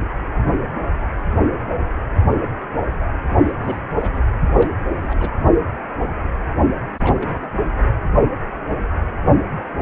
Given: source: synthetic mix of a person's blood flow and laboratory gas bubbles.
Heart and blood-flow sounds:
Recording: Doppler ultrasound of blood flow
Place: precordium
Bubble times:
3.41-3.52 s: bubbles
3.59-3.83 s: bubbles
4.00-4.25 s: bubbles
4.58-4.70 s: bubbles
4.92-5.30 s: bubbles
6.98-7.48 s: bubbles
From the record:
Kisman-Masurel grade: 221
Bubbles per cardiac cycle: several, 3 to 8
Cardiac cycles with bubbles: 10 to 50%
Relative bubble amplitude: barely perceptible (0.100 to 0.250)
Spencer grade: 2 (many but less than half of the cardiac periods contain bubble signals, singularly or in groups)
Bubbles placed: anywhere in the cardiac cycle

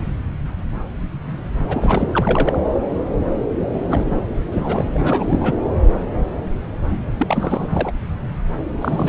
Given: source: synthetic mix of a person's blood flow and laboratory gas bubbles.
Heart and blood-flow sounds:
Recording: Doppler ultrasound of blood flow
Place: subclavian vein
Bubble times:
1.64-2.08 s: bubbles
2.12-2.58 s: bubbles
3.89-4.05 s: bubbles
4.09-4.22 s: bubbles
4.51-4.85 s: bubbles
4.94-5.53 s: bubbles
7.18-7.67 s: bubbles
7.70-7.92 s: bubbles
8.81-9.08 s: bubbles
From the record:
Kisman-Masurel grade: 332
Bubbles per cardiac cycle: rolling drumbeat, 9 or more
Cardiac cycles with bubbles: 50 to 99%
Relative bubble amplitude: moderate (0.250 to 0.450)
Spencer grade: 3 (all of the cardiac periods contain showers or single bubble signals, but not dominating or overriding the cardiac motion signals)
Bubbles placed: anywhere in the cardiac cycle

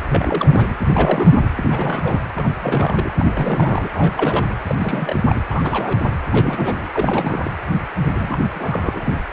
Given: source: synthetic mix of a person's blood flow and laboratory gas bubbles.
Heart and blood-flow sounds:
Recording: Doppler ultrasound of blood flow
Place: precordium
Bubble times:
0.09-0.76 s: bubbles
0.81-1.41 s: bubbles
1.58-2.20 s: bubbles
2.36-2.53 s: bubbles
2.55-3.13 s: bubbles
3.17-3.89 s: bubbles
3.92-4.56 s: bubbles
4.67-4.75 s: bubbles
4.78-5.20 s: bubbles
5.24-5.41 s: bubbles
5.50-5.99 s: bubbles
6.02-6.12 s: bubbles
6.31-6.88 s: bubbles
6.94-7.52 s: bubbles
8.03-8.38 s: bubbles
8.54-9.21 s: bubbles
From the record:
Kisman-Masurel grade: 332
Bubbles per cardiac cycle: rolling drumbeat, 9 or more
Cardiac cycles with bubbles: 50 to 99%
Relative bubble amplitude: moderate (0.250 to 0.450)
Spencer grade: 3 (all of the cardiac periods contain showers or single bubble signals, but not dominating or overriding the cardiac motion signals)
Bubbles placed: anywhere in the cardiac cycle

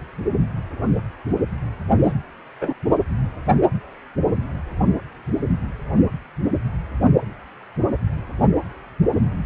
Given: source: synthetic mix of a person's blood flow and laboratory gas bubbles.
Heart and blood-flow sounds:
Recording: Doppler ultrasound of blood flow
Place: precordium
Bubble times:
2.03-2.13 s: bubbles
2.60-2.74 s: bubbles
From the record:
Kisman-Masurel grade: 112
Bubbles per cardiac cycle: 1 to 2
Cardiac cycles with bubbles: 1 to 10%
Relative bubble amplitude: moderate (0.250 to 0.450)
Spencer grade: 1 (occasional bubble signal discernible with the cardiac motion signal, with majority of cardiac periods free of bubbles)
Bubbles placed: only in the low amplitude regions of the cardiac cycle

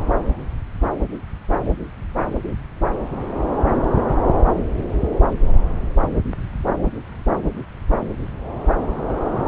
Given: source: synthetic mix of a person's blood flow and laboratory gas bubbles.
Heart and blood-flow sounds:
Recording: Doppler ultrasound of blood flow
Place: subclavian vein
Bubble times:
no bubbles
From the record:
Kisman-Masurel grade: 000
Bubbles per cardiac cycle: 0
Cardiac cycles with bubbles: 0%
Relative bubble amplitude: no bubbles discernible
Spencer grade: 0 (complete lack of bubble signals)

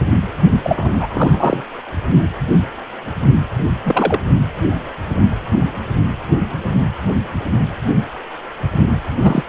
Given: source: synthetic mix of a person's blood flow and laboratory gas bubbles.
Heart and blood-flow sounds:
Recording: Doppler ultrasound of blood flow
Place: precordium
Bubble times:
0.52-0.60 s: bubbles
0.64-1.62 s: bubbles
3.84-4.20 s: bubbles
9.21-9.45 s: bubbles
From the record:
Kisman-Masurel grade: 223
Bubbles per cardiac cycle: several, 3 to 8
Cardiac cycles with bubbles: 10 to 50%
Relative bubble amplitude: loud (0.450 to 0.775)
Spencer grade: 2 (many but less than half of the cardiac periods contain bubble signals, singularly or in groups)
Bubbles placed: only in the low amplitude regions of the cardiac cycle

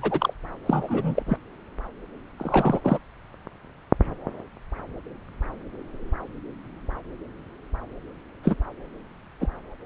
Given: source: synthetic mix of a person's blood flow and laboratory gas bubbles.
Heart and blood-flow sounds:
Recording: Doppler ultrasound of blood flow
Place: subclavian vein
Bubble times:
0.00-0.33 s: bubbles
0.66-1.23 s: bubbles
1.26-1.38 s: bubbles
2.38-2.79 s: bubbles
2.83-2.98 s: bubbles
8.44-8.55 s: bubbles
9.41-9.48 s: bubbles
From the record:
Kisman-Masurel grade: 222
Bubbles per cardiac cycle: several, 3 to 8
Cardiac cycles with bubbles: 10 to 50%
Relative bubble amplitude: moderate (0.250 to 0.450)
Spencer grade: 2 (many but less than half of the cardiac periods contain bubble signals, singularly or in groups)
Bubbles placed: anywhere in the cardiac cycle

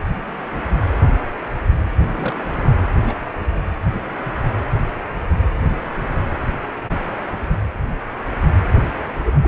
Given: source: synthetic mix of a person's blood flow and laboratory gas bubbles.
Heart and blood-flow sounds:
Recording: Doppler ultrasound of blood flow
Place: precordium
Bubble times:
2.02-2.43 s: bubbles
3.05-3.13 s: bubbles
9.25-9.32 s: bubbles
9.41-9.48 s: bubbles
From the record:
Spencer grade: 2 (many but less than half of the cardiac periods contain bubble signals, singularly or in groups)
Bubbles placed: anywhere in the cardiac cycle

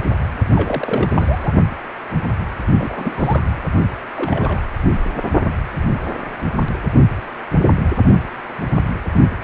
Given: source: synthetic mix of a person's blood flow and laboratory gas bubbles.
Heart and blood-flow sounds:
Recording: Doppler ultrasound of blood flow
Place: precordium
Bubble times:
0.55-1.08 s: bubbles
1.11-1.52 s: bubbles
2.78-3.62 s: bubbles
4.16-4.60 s: bubbles
From the record:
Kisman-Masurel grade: 222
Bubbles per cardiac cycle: several, 3 to 8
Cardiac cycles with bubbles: 10 to 50%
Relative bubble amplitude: moderate (0.250 to 0.450)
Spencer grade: 2 (many but less than half of the cardiac periods contain bubble signals, singularly or in groups)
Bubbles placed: only in the low amplitude regions of the cardiac cycle

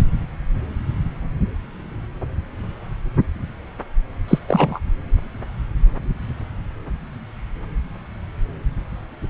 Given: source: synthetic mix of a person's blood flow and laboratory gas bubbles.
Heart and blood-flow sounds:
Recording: Doppler ultrasound of blood flow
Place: subclavian vein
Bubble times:
4.28-4.39 s: bubbles
4.48-4.79 s: bubbles
From the record:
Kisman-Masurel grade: 213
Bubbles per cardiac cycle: several, 3 to 8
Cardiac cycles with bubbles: 1 to 10%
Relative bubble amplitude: loud (0.450 to 0.775)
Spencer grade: 1 (occasional bubble signal discernible with the cardiac motion signal, with majority of cardiac periods free of bubbles)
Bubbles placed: anywhere in the cardiac cycle

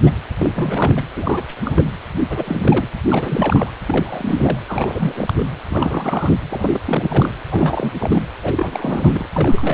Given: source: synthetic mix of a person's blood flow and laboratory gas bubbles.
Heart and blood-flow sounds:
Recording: Doppler ultrasound of blood flow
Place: precordium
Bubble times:
0.00-0.15 s: bubbles
0.39-0.52 s: bubbles
0.54-1.06 s: bubbles
1.16-1.43 s: bubbles
1.48-1.54 s: bubbles
1.65-1.82 s: bubbles
2.29-2.87 s: bubbles
3.09-3.73 s: bubbles
3.86-4.60 s: bubbles
4.68-5.33 s: bubbles
5.37-5.46 s: bubbles
5.68-6.36 s: bubbles
6.50-6.80 s: bubbles
6.85-7.35 s: bubbles
7.51-7.95 s: bubbles
7.98-8.22 s: bubbles
8.42-9.25 s: bubbles
9.34-9.74 s: bubbles
From the record:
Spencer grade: 3 (all of the cardiac periods contain showers or single bubble signals, but not dominating or overriding the cardiac motion signals)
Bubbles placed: anywhere in the cardiac cycle

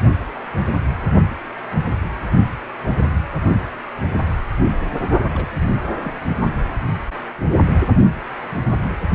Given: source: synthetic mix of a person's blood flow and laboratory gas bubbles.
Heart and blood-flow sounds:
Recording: Doppler ultrasound of blood flow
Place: precordium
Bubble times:
5.33-5.46 s: bubbles
5.58-5.72 s: bubbles
6.03-6.12 s: bubbles
From the record:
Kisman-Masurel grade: 221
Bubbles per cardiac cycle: several, 3 to 8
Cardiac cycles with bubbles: 10 to 50%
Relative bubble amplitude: barely perceptible (0.100 to 0.250)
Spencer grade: 2 (many but less than half of the cardiac periods contain bubble signals, singularly or in groups)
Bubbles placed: only in the low amplitude regions of the cardiac cycle

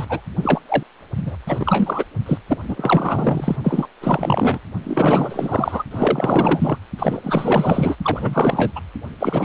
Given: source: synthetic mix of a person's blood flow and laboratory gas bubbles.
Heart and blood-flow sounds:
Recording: Doppler ultrasound of blood flow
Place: precordium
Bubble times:
0.00-0.05 s: bubbles
0.09-0.21 s: bubbles
0.42-0.60 s: bubbles
0.68-0.83 s: bubbles
1.17-1.36 s: bubbles
1.47-2.04 s: bubbles
2.26-2.38 s: bubbles
2.47-2.58 s: bubbles
2.68-3.56 s: bubbles
3.64-3.87 s: bubbles
4.01-4.58 s: bubbles
4.83-5.83 s: bubbles
5.91-6.78 s: bubbles
6.98-7.95 s: bubbles
8.02-8.72 s: bubbles
8.76-8.80 s: bubbles
9.20-9.45 s: bubbles
From the record:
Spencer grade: 4 (maximum detectable bubble signal sounding continuously throughout systole and diastole of every cardiac period, and overriding the amplitude of the normal cardiac signals)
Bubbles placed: only in the low amplitude regions of the cardiac cycle

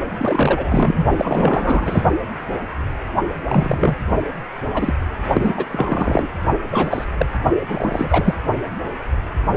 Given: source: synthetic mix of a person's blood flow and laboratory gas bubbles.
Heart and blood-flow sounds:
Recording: Doppler ultrasound of blood flow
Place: precordium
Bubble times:
0.18-1.06 s: bubbles
1.17-2.02 s: bubbles
3.46-3.96 s: bubbles
4.74-4.95 s: bubbles
5.33-5.66 s: bubbles
5.71-6.28 s: bubbles
6.72-7.04 s: bubbles
7.17-7.26 s: bubbles
7.68-8.35 s: bubbles
From the record:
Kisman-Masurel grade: 233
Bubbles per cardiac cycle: several, 3 to 8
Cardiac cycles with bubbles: 50 to 99%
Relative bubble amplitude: loud (0.450 to 0.775)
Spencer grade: 3 (all of the cardiac periods contain showers or single bubble signals, but not dominating or overriding the cardiac motion signals)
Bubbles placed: only in the low amplitude regions of the cardiac cycle

